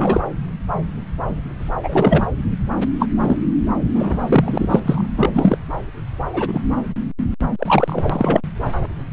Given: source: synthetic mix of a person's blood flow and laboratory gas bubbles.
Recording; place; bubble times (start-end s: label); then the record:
Doppler ultrasound of blood flow; subclavian vein
0.00-0.23 s: bubbles
1.83-2.27 s: bubbles
3.00-3.06 s: bubbles
3.17-3.41 s: bubbles
3.94-4.80 s: bubbles
4.83-5.05 s: bubbles
5.15-5.29 s: bubbles
5.33-5.57 s: bubbles
6.33-6.62 s: bubbles
7.58-8.41 s: bubbles
From the record:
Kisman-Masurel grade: 233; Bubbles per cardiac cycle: several, 3 to 8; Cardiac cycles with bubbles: 50 to 99%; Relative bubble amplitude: loud (0.450 to 0.775); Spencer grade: 3 (all of the cardiac periods contain showers or single bubble signals, but not dominating or overriding the cardiac motion signals); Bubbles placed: anywhere in the cardiac cycle